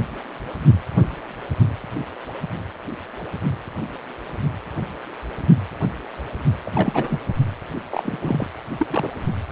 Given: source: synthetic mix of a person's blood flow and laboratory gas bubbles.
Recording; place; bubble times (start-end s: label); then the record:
Doppler ultrasound of blood flow; precordium
6.66-7.19 s: bubbles
7.90-8.47 s: bubbles
8.79-8.88 s: bubbles
8.90-9.10 s: bubbles
From the record:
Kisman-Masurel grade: 222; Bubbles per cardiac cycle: several, 3 to 8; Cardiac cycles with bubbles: 10 to 50%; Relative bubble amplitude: moderate (0.250 to 0.450); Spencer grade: 2 (many but less than half of the cardiac periods contain bubble signals, singularly or in groups); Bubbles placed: only in the low amplitude regions of the cardiac cycle